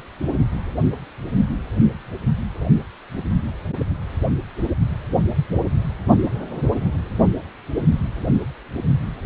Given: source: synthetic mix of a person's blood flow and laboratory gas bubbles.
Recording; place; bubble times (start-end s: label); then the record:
Doppler ultrasound of blood flow; precordium
no bubbles
From the record:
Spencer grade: 0 (complete lack of bubble signals)